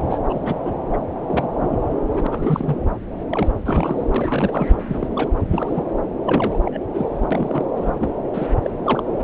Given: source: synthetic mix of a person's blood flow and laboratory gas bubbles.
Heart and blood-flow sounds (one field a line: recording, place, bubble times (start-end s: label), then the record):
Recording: Doppler ultrasound of blood flow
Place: subclavian vein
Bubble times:
0.09-0.18 s: bubbles
0.29-0.73 s: bubbles
0.92-0.98 s: bubbles
1.27-1.48 s: bubbles
1.60-2.00 s: bubbles
2.12-2.27 s: bubbles
2.30-2.75 s: bubbles
3.29-3.48 s: bubbles
3.65-3.96 s: bubbles
4.14-4.77 s: bubbles
4.87-5.07 s: bubbles
5.15-5.28 s: bubbles
5.50-5.85 s: bubbles
6.24-6.59 s: bubbles
6.64-6.78 s: bubbles
6.93-7.27 s: bubbles
7.30-7.65 s: bubbles
7.76-8.11 s: bubbles
8.33-8.46 s: bubbles
8.62-9.03 s: bubbles
From the record:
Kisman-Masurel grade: 242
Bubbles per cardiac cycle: several, 3 to 8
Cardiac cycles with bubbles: 100%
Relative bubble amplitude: moderate (0.250 to 0.450)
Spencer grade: 3 (all of the cardiac periods contain showers or single bubble signals, but not dominating or overriding the cardiac motion signals)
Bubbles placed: anywhere in the cardiac cycle